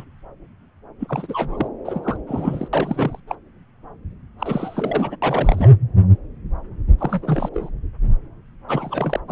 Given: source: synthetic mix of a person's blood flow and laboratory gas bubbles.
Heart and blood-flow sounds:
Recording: Doppler ultrasound of blood flow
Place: subclavian vein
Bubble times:
0.00-0.04 s: bubbles
1.00-1.68 s: bubbles
1.84-2.17 s: bubbles
2.27-2.68 s: bubbles
2.73-3.17 s: bubbles
3.28-3.36 s: bubbles
4.38-5.16 s: bubbles
5.22-5.77 s: bubbles
6.98-7.49 s: bubbles
7.54-7.69 s: bubbles
8.68-9.20 s: bubbles
9.28-9.32 s: bubbles
From the record:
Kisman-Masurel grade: 332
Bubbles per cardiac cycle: rolling drumbeat, 9 or more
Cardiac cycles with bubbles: 50 to 99%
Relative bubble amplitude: moderate (0.250 to 0.450)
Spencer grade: 3 (all of the cardiac periods contain showers or single bubble signals, but not dominating or overriding the cardiac motion signals)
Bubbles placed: anywhere in the cardiac cycle

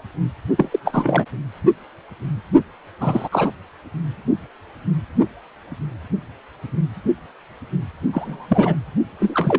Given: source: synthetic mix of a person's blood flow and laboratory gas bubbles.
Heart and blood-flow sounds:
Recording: Doppler ultrasound of blood flow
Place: precordium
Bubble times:
0.57-0.79 s: bubbles
0.84-1.25 s: bubbles
3.01-3.29 s: bubbles
3.31-3.51 s: bubbles
8.13-8.76 s: bubbles
9.20-9.59 s: bubbles
From the record:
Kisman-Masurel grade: 222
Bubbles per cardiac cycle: several, 3 to 8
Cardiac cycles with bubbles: 10 to 50%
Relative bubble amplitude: moderate (0.250 to 0.450)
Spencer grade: 2 (many but less than half of the cardiac periods contain bubble signals, singularly or in groups)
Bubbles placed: only in the low amplitude regions of the cardiac cycle

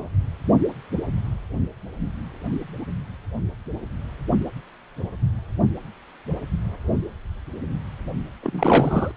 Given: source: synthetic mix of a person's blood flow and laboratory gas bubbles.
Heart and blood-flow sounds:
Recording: Doppler ultrasound of blood flow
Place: precordium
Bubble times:
8.43-9.12 s: bubbles
From the record:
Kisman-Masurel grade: 212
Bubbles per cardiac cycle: several, 3 to 8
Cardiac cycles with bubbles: 1 to 10%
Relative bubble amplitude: moderate (0.250 to 0.450)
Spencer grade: 1 (occasional bubble signal discernible with the cardiac motion signal, with majority of cardiac periods free of bubbles)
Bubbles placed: only in the low amplitude regions of the cardiac cycle

